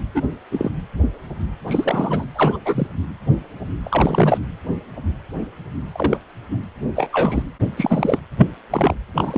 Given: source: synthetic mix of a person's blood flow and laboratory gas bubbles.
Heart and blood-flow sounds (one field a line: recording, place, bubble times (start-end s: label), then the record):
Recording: Doppler ultrasound of blood flow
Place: precordium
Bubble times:
0.14-0.24 s: bubbles
0.52-0.71 s: bubbles
1.68-2.25 s: bubbles
2.35-2.58 s: bubbles
2.65-2.87 s: bubbles
3.83-4.38 s: bubbles
5.92-6.17 s: bubbles
6.50-6.58 s: bubbles
6.96-7.42 s: bubbles
7.76-8.20 s: bubbles
8.38-8.47 s: bubbles
8.71-8.96 s: bubbles
9.14-9.37 s: bubbles
From the record:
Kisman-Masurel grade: 233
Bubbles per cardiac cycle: several, 3 to 8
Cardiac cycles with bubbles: 50 to 99%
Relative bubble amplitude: loud (0.450 to 0.775)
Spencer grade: 3 (all of the cardiac periods contain showers or single bubble signals, but not dominating or overriding the cardiac motion signals)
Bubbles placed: anywhere in the cardiac cycle